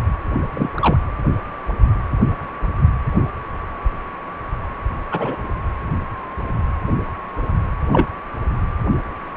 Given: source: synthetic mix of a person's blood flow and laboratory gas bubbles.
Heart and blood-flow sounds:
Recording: Doppler ultrasound of blood flow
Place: precordium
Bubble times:
0.54-0.69 s: bubbles
0.75-0.96 s: bubbles
5.11-5.38 s: bubbles
7.91-8.07 s: bubbles
From the record:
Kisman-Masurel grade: 123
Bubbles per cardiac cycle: 1 to 2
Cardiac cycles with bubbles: 10 to 50%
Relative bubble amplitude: loud (0.450 to 0.775)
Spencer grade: 2 (many but less than half of the cardiac periods contain bubble signals, singularly or in groups)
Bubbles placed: anywhere in the cardiac cycle

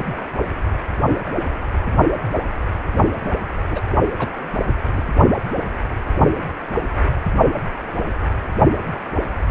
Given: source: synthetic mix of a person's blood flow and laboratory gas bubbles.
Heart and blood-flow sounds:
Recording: Doppler ultrasound of blood flow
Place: precordium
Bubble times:
3.24-3.31 s: bubbles
3.71-3.83 s: bubbles
4.19-4.29 s: bubbles
4.94-5.02 s: bubbles
From the record:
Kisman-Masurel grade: 122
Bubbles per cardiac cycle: 1 to 2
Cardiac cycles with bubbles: 10 to 50%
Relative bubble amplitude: moderate (0.250 to 0.450)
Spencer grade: 2 (many but less than half of the cardiac periods contain bubble signals, singularly or in groups)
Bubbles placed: only in the low amplitude regions of the cardiac cycle

